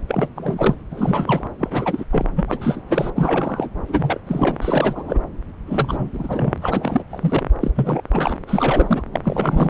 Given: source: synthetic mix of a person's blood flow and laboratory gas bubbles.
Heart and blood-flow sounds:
Doppler ultrasound of blood flow; subclavian vein
0.08-0.31 s: bubbles
0.35-0.75 s: bubbles
0.91-1.48 s: bubbles
1.58-2.04 s: bubbles
2.10-2.25 s: bubbles
2.36-2.80 s: bubbles
2.88-3.10 s: bubbles
3.15-3.70 s: bubbles
3.88-4.20 s: bubbles
4.26-4.57 s: bubbles
4.62-5.18 s: bubbles
5.67-6.58 s: bubbles
6.62-7.03 s: bubbles
7.09-7.49 s: bubbles
7.60-7.71 s: bubbles
7.75-8.02 s: bubbles
8.12-8.37 s: bubbles
8.47-9.03 s: bubbles
9.13-9.70 s: bubbles
From the record:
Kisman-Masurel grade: 342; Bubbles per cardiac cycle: rolling drumbeat, 9 or more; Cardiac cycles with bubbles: 100%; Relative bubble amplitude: moderate (0.250 to 0.450); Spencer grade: 3 (all of the cardiac periods contain showers or single bubble signals, but not dominating or overriding the cardiac motion signals); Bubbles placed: anywhere in the cardiac cycle

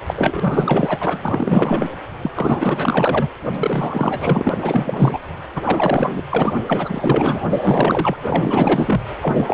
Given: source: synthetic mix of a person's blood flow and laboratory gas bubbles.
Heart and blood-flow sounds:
Doppler ultrasound of blood flow; precordium
0.06-0.14 s: bubbles
0.17-1.88 s: bubbles
2.22-2.30 s: bubbles
2.34-3.29 s: bubbles
3.46-4.58 s: bubbles
4.62-5.21 s: bubbles
5.54-5.62 s: bubbles
5.65-6.22 s: bubbles
6.29-6.60 s: bubbles
6.67-7.47 s: bubbles
7.50-8.17 s: bubbles
8.27-9.01 s: bubbles
9.21-9.54 s: bubbles
From the record:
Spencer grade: 4 (maximum detectable bubble signal sounding continuously throughout systole and diastole of every cardiac period, and overriding the amplitude of the normal cardiac signals); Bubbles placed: anywhere in the cardiac cycle

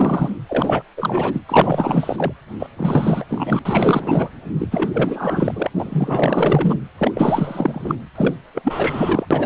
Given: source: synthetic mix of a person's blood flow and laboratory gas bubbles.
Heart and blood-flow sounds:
Doppler ultrasound of blood flow; precordium
0.00-0.30 s: bubbles
0.48-0.82 s: bubbles
0.96-1.41 s: bubbles
1.48-2.33 s: bubbles
2.59-2.67 s: bubbles
2.77-3.25 s: bubbles
3.29-3.59 s: bubbles
3.65-4.29 s: bubbles
4.58-4.68 s: bubbles
4.71-5.70 s: bubbles
5.78-6.78 s: bubbles
6.98-7.12 s: bubbles
7.14-7.95 s: bubbles
8.15-8.35 s: bubbles
8.54-9.26 s: bubbles
9.30-9.46 s: bubbles
From the record:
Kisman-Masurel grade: 444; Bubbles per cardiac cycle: continuous sound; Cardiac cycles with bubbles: 100%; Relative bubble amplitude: maximal (0.775 to 0.999); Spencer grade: 4 (maximum detectable bubble signal sounding continuously throughout systole and diastole of every cardiac period, and overriding the amplitude of the normal cardiac signals); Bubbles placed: anywhere in the cardiac cycle

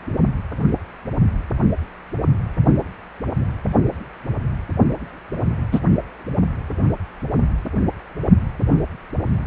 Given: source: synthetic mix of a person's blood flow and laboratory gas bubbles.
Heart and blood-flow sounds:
Doppler ultrasound of blood flow; precordium
5.72-5.80 s: bubbles
From the record:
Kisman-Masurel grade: 113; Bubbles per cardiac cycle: 1 to 2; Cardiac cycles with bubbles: 1 to 10%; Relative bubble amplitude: loud (0.450 to 0.775); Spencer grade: 1 (occasional bubble signal discernible with the cardiac motion signal, with majority of cardiac periods free of bubbles); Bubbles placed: only in the low amplitude regions of the cardiac cycle

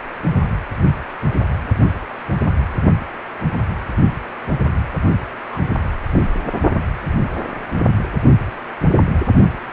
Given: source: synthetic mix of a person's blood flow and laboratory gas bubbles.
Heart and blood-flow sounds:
Doppler ultrasound of blood flow; precordium
5.52-5.58 s: bubbles
6.11-6.23 s: bubbles
From the record:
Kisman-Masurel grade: 111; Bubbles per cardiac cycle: 1 to 2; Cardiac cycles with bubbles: 1 to 10%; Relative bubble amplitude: barely perceptible (0.100 to 0.250); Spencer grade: 1 (occasional bubble signal discernible with the cardiac motion signal, with majority of cardiac periods free of bubbles); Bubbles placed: only in the low amplitude regions of the cardiac cycle

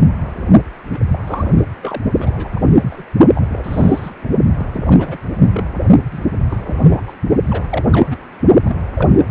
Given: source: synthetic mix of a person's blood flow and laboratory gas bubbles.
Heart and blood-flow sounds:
Doppler ultrasound of blood flow; precordium
0.92-1.00 s: bubbles
1.12-1.19 s: bubbles
1.27-1.63 s: bubbles
1.83-2.04 s: bubbles
2.17-2.50 s: bubbles
2.53-2.61 s: bubbles
2.72-3.04 s: bubbles
3.35-3.46 s: bubbles
3.52-4.13 s: bubbles
4.24-4.28 s: bubbles
4.58-4.65 s: bubbles
4.73-5.17 s: bubbles
5.37-5.68 s: bubbles
6.12-6.20 s: bubbles
6.50-7.15 s: bubbles
7.50-7.66 s: bubbles
7.70-7.85 s: bubbles
7.92-8.17 s: bubbles
8.65-8.76 s: bubbles
8.95-9.24 s: bubbles
From the record:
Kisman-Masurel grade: 242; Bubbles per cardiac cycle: several, 3 to 8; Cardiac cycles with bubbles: 100%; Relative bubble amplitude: moderate (0.250 to 0.450); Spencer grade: 3 (all of the cardiac periods contain showers or single bubble signals, but not dominating or overriding the cardiac motion signals); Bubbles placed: only in the low amplitude regions of the cardiac cycle

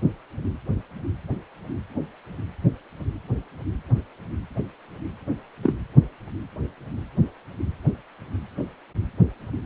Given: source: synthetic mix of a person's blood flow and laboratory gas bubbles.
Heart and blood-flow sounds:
Doppler ultrasound of blood flow; precordium
5.62-5.74 s: bubbles
From the record:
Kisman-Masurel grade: 113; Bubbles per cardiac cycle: 1 to 2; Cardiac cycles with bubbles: 1 to 10%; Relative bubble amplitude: loud (0.450 to 0.775); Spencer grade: 1 (occasional bubble signal discernible with the cardiac motion signal, with majority of cardiac periods free of bubbles); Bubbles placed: anywhere in the cardiac cycle

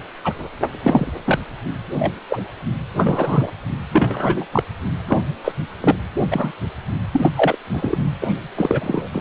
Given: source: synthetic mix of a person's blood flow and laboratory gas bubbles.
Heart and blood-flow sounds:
Doppler ultrasound of blood flow; precordium
0.24-0.33 s: bubbles
0.83-1.11 s: bubbles
1.26-1.39 s: bubbles
1.99-2.13 s: bubbles
2.29-2.43 s: bubbles
2.94-3.51 s: bubbles
3.92-4.46 s: bubbles
4.52-4.64 s: bubbles
5.07-5.21 s: bubbles
5.44-5.52 s: bubbles
5.81-5.96 s: bubbles
6.31-6.52 s: bubbles
7.12-7.31 s: bubbles
7.36-7.56 s: bubbles
7.72-7.97 s: bubbles
8.21-8.34 s: bubbles
8.55-9.08 s: bubbles
9.12-9.21 s: bubbles
From the record:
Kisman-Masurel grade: 243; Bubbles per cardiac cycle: several, 3 to 8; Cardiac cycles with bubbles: 100%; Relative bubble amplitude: loud (0.450 to 0.775); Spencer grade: 3 (all of the cardiac periods contain showers or single bubble signals, but not dominating or overriding the cardiac motion signals); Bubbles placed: anywhere in the cardiac cycle

